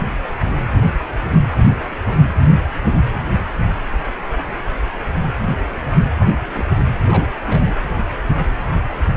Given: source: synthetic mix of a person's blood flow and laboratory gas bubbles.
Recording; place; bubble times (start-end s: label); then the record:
Doppler ultrasound of blood flow; precordium
6.20-6.27 s: bubbles
6.44-6.73 s: bubbles
6.75-6.83 s: bubbles
7.06-7.29 s: bubbles
7.46-7.84 s: bubbles
From the record:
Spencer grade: 2 (many but less than half of the cardiac periods contain bubble signals, singularly or in groups); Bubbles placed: anywhere in the cardiac cycle